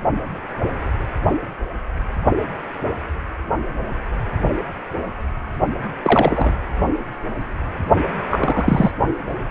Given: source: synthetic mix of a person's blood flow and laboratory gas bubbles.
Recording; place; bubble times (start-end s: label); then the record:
Doppler ultrasound of blood flow; precordium
6.04-6.54 s: bubbles
8.30-8.91 s: bubbles
From the record:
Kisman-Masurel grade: 223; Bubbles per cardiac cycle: several, 3 to 8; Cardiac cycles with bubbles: 10 to 50%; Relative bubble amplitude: loud (0.450 to 0.775); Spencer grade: 2 (many but less than half of the cardiac periods contain bubble signals, singularly or in groups); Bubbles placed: only in the low amplitude regions of the cardiac cycle